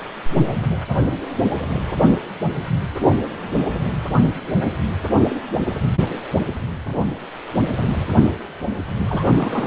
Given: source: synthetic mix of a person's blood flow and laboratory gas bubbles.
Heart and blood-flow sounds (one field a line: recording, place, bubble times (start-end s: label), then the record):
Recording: Doppler ultrasound of blood flow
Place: precordium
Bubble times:
9.08-9.66 s: bubbles
From the record:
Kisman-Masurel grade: 212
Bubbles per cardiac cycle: several, 3 to 8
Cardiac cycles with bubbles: 1 to 10%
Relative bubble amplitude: moderate (0.250 to 0.450)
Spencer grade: 1 (occasional bubble signal discernible with the cardiac motion signal, with majority of cardiac periods free of bubbles)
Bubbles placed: anywhere in the cardiac cycle